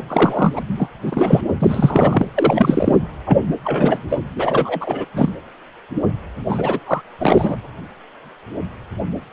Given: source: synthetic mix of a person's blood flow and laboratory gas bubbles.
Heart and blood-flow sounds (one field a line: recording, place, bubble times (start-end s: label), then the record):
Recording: Doppler ultrasound of blood flow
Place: precordium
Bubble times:
0.08-0.60 s: bubbles
0.68-0.89 s: bubbles
1.02-1.41 s: bubbles
1.60-2.31 s: bubbles
2.35-2.96 s: bubbles
3.26-3.40 s: bubbles
3.64-4.21 s: bubbles
4.36-5.05 s: bubbles
5.14-5.29 s: bubbles
6.49-6.79 s: bubbles
6.86-7.02 s: bubbles
7.20-7.56 s: bubbles
From the record:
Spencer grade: 3 (all of the cardiac periods contain showers or single bubble signals, but not dominating or overriding the cardiac motion signals)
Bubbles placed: anywhere in the cardiac cycle